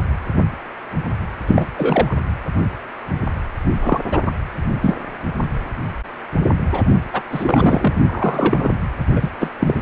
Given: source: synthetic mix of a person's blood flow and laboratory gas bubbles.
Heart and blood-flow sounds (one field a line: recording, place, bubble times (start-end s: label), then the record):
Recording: Doppler ultrasound of blood flow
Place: precordium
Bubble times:
1.47-1.66 s: bubbles
1.77-2.17 s: bubbles
3.81-3.99 s: bubbles
4.11-4.18 s: bubbles
4.25-4.32 s: bubbles
4.82-4.95 s: bubbles
6.72-6.83 s: bubbles
7.12-7.21 s: bubbles
7.32-7.97 s: bubbles
8.04-8.70 s: bubbles
9.15-9.29 s: bubbles
9.40-9.51 s: bubbles
9.59-9.74 s: bubbles
From the record:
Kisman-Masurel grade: 223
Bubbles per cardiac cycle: several, 3 to 8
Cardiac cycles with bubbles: 10 to 50%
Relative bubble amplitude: loud (0.450 to 0.775)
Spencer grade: 2 (many but less than half of the cardiac periods contain bubble signals, singularly or in groups)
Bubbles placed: anywhere in the cardiac cycle